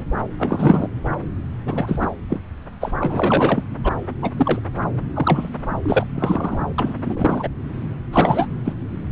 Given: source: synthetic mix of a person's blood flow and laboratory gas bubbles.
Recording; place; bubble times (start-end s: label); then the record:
Doppler ultrasound of blood flow; subclavian vein
0.00-0.04 s: bubbles
0.38-0.88 s: bubbles
1.65-2.08 s: bubbles
2.29-2.40 s: bubbles
2.81-2.94 s: bubbles
3.02-3.63 s: bubbles
3.83-3.89 s: bubbles
4.22-4.31 s: bubbles
4.37-4.59 s: bubbles
5.15-5.49 s: bubbles
5.82-6.07 s: bubbles
6.14-6.60 s: bubbles
6.78-6.95 s: bubbles
7.03-7.49 s: bubbles
8.12-8.46 s: bubbles
8.64-8.73 s: bubbles
From the record:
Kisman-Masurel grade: 243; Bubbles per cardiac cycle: several, 3 to 8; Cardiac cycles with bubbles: 100%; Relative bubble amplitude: loud (0.450 to 0.775); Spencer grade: 3 (all of the cardiac periods contain showers or single bubble signals, but not dominating or overriding the cardiac motion signals); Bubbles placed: anywhere in the cardiac cycle